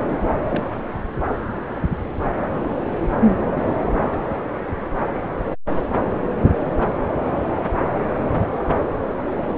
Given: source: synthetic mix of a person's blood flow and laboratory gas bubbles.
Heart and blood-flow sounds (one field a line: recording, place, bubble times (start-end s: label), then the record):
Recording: Doppler ultrasound of blood flow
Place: subclavian vein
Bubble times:
0.49-0.81 s: bubbles
9.31-9.34 s: bubbles
9.46-9.54 s: bubbles
From the record:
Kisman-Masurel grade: 221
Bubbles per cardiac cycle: several, 3 to 8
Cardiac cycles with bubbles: 10 to 50%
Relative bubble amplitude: barely perceptible (0.100 to 0.250)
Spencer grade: 2 (many but less than half of the cardiac periods contain bubble signals, singularly or in groups)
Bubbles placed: anywhere in the cardiac cycle